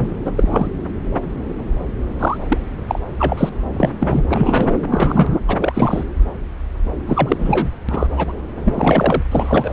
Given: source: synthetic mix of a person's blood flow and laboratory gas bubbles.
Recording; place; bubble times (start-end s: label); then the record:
Doppler ultrasound of blood flow; subclavian vein
0.00-0.20 s: bubbles
0.25-0.32 s: bubbles
0.35-0.69 s: bubbles
2.19-2.38 s: bubbles
2.48-2.58 s: bubbles
2.88-2.99 s: bubbles
3.19-3.49 s: bubbles
3.72-3.89 s: bubbles
4.00-4.22 s: bubbles
4.29-4.75 s: bubbles
4.91-5.39 s: bubbles
5.47-6.04 s: bubbles
7.06-7.67 s: bubbles
7.88-8.07 s: bubbles
8.16-8.32 s: bubbles
8.64-9.22 s: bubbles
9.31-9.73 s: bubbles
From the record:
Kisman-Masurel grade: 233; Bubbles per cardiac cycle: several, 3 to 8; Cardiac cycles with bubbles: 50 to 99%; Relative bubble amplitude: loud (0.450 to 0.775); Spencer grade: 3 (all of the cardiac periods contain showers or single bubble signals, but not dominating or overriding the cardiac motion signals); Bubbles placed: anywhere in the cardiac cycle